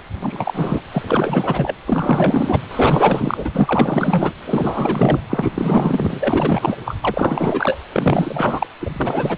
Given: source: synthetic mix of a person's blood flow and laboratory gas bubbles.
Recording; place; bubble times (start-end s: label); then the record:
Doppler ultrasound of blood flow; precordium
0.00-0.02 s: bubbles
0.22-0.81 s: bubbles
0.92-1.76 s: bubbles
1.86-2.60 s: bubbles
2.70-3.50 s: bubbles
3.54-4.33 s: bubbles
4.46-5.23 s: bubbles
5.29-6.75 s: bubbles
6.85-6.96 s: bubbles
7.02-7.78 s: bubbles
7.92-8.67 s: bubbles
8.81-9.37 s: bubbles
From the record:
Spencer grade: 4 (maximum detectable bubble signal sounding continuously throughout systole and diastole of every cardiac period, and overriding the amplitude of the normal cardiac signals); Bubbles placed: anywhere in the cardiac cycle